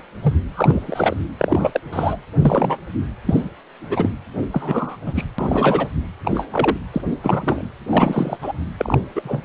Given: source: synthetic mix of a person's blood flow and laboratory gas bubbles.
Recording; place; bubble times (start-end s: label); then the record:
Doppler ultrasound of blood flow; precordium
0.23-0.34 s: bubbles
0.54-1.15 s: bubbles
1.38-1.80 s: bubbles
1.93-2.17 s: bubbles
2.40-2.77 s: bubbles
3.26-3.49 s: bubbles
3.81-4.10 s: bubbles
4.53-4.96 s: bubbles
5.06-5.25 s: bubbles
5.38-5.87 s: bubbles
6.25-6.46 s: bubbles
6.50-6.77 s: bubbles
6.94-7.02 s: bubbles
7.23-7.65 s: bubbles
7.91-8.38 s: bubbles
8.41-8.52 s: bubbles
8.77-8.98 s: bubbles
9.15-9.40 s: bubbles
From the record:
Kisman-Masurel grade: 242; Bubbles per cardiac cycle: several, 3 to 8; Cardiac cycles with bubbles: 100%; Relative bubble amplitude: moderate (0.250 to 0.450); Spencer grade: 3 (all of the cardiac periods contain showers or single bubble signals, but not dominating or overriding the cardiac motion signals); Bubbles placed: anywhere in the cardiac cycle